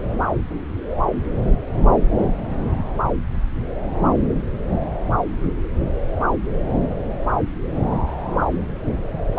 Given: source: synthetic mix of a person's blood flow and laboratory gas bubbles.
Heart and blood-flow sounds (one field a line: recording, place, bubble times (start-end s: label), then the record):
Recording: Doppler ultrasound of blood flow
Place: subclavian vein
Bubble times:
no bubbles
From the record:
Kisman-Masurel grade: 000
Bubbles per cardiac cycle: 0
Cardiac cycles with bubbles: 0%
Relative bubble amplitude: no bubbles discernible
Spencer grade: 0 (complete lack of bubble signals)